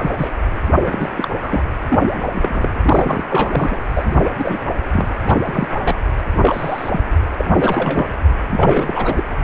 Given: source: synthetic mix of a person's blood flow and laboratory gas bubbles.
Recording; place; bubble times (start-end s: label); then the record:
Doppler ultrasound of blood flow; precordium
0.00-0.29 s: bubbles
0.84-1.10 s: bubbles
1.17-1.28 s: bubbles
1.37-1.63 s: bubbles
1.89-2.00 s: bubbles
2.15-2.20 s: bubbles
2.33-2.68 s: bubbles
2.83-3.24 s: bubbles
3.29-3.79 s: bubbles
3.94-4.16 s: bubbles
4.38-4.60 s: bubbles
4.92-5.08 s: bubbles
5.26-5.38 s: bubbles
5.45-5.68 s: bubbles
5.78-5.95 s: bubbles
6.43-7.00 s: bubbles
7.38-7.45 s: bubbles
7.55-8.18 s: bubbles
8.50-9.23 s: bubbles
From the record:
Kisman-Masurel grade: 242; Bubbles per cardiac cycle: several, 3 to 8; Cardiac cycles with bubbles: 100%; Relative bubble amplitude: moderate (0.250 to 0.450); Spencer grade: 3 (all of the cardiac periods contain showers or single bubble signals, but not dominating or overriding the cardiac motion signals); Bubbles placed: anywhere in the cardiac cycle